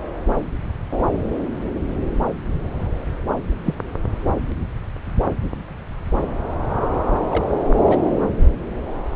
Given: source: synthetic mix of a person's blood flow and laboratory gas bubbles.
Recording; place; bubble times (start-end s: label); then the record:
Doppler ultrasound of blood flow; subclavian vein
3.64-3.75 s: bubbles
7.30-7.44 s: bubbles
7.86-7.99 s: bubbles
From the record:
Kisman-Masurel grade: 122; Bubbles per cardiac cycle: 1 to 2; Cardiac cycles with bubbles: 10 to 50%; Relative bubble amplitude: moderate (0.250 to 0.450); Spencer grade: 2 (many but less than half of the cardiac periods contain bubble signals, singularly or in groups); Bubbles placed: anywhere in the cardiac cycle